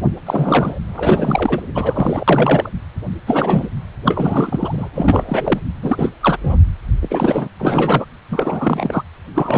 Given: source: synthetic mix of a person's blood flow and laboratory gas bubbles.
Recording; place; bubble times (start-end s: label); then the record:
Doppler ultrasound of blood flow; precordium
0.25-0.79 s: bubbles
0.95-1.62 s: bubbles
1.74-2.24 s: bubbles
2.28-2.70 s: bubbles
3.27-3.67 s: bubbles
4.04-4.88 s: bubbles
4.95-5.59 s: bubbles
5.82-6.09 s: bubbles
6.21-6.37 s: bubbles
6.42-6.57 s: bubbles
7.02-7.48 s: bubbles
7.58-8.05 s: bubbles
8.29-9.03 s: bubbles
9.34-9.58 s: bubbles
From the record:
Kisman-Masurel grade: 333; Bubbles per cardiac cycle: rolling drumbeat, 9 or more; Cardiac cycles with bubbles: 50 to 99%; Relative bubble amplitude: loud (0.450 to 0.775); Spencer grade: 3 (all of the cardiac periods contain showers or single bubble signals, but not dominating or overriding the cardiac motion signals); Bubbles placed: anywhere in the cardiac cycle